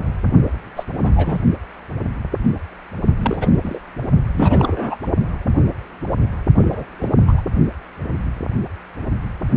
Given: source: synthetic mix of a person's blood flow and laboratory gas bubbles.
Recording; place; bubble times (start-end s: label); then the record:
Doppler ultrasound of blood flow; precordium
0.76-0.83 s: bubbles
1.03-1.39 s: bubbles
3.19-3.79 s: bubbles
4.33-4.96 s: bubbles
6.57-6.65 s: bubbles
6.70-6.84 s: bubbles
6.99-7.08 s: bubbles
7.27-7.42 s: bubbles
From the record:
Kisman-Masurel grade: 232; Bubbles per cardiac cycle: several, 3 to 8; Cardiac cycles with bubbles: 50 to 99%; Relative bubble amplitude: moderate (0.250 to 0.450); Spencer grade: 3 (all of the cardiac periods contain showers or single bubble signals, but not dominating or overriding the cardiac motion signals); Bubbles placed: only in the low amplitude regions of the cardiac cycle